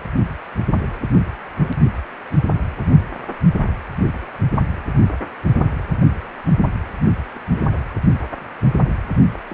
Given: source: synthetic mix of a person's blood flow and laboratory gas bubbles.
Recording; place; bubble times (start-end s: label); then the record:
Doppler ultrasound of blood flow; precordium
7.34-7.38 s: bubbles
7.53-7.80 s: bubbles
9.34-9.37 s: bubbles
9.49-9.53 s: bubbles
From the record:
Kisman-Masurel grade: 221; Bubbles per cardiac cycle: several, 3 to 8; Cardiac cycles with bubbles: 10 to 50%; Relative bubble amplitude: barely perceptible (0.100 to 0.250); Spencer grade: 2 (many but less than half of the cardiac periods contain bubble signals, singularly or in groups); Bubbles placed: only in the low amplitude regions of the cardiac cycle